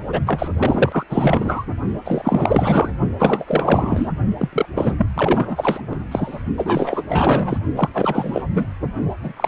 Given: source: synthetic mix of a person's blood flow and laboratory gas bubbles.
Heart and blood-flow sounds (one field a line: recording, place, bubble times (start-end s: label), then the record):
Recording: Doppler ultrasound of blood flow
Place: precordium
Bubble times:
0.12-0.20 s: bubbles
0.26-0.48 s: bubbles
0.58-1.04 s: bubbles
1.09-1.66 s: bubbles
2.04-2.92 s: bubbles
3.19-4.10 s: bubbles
4.38-4.48 s: bubbles
4.53-4.65 s: bubbles
4.74-5.06 s: bubbles
5.15-5.80 s: bubbles
5.91-5.97 s: bubbles
6.11-6.43 s: bubbles
6.57-7.02 s: bubbles
7.09-7.58 s: bubbles
7.76-7.89 s: bubbles
7.94-8.43 s: bubbles
8.54-8.66 s: bubbles
9.22-9.33 s: bubbles
9.36-9.48 s: bubbles
From the record:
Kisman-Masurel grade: 444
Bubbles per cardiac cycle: continuous sound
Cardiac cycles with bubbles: 100%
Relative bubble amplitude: maximal (0.775 to 0.999)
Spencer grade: 4 (maximum detectable bubble signal sounding continuously throughout systole and diastole of every cardiac period, and overriding the amplitude of the normal cardiac signals)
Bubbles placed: only in the low amplitude regions of the cardiac cycle